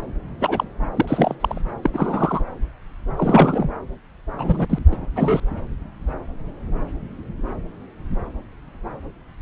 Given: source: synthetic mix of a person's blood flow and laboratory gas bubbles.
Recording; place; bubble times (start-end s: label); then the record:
Doppler ultrasound of blood flow; subclavian vein
0.40-0.64 s: bubbles
0.95-1.35 s: bubbles
1.40-1.61 s: bubbles
1.83-1.90 s: bubbles
1.93-2.42 s: bubbles
3.17-3.70 s: bubbles
4.38-4.67 s: bubbles
4.70-4.79 s: bubbles
4.92-4.96 s: bubbles
5.16-5.40 s: bubbles
From the record:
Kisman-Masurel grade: 223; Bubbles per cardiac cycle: several, 3 to 8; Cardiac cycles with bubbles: 10 to 50%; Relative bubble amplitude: loud (0.450 to 0.775); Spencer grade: 2 (many but less than half of the cardiac periods contain bubble signals, singularly or in groups); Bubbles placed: anywhere in the cardiac cycle